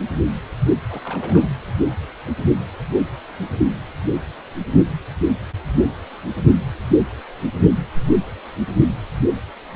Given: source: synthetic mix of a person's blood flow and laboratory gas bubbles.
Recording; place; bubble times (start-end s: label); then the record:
Doppler ultrasound of blood flow; precordium
0.89-1.00 s: bubbles
1.04-1.48 s: bubbles
From the record:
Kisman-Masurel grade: 111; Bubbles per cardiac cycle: 1 to 2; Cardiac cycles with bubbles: 1 to 10%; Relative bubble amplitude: barely perceptible (0.100 to 0.250); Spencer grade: 1 (occasional bubble signal discernible with the cardiac motion signal, with majority of cardiac periods free of bubbles); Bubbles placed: anywhere in the cardiac cycle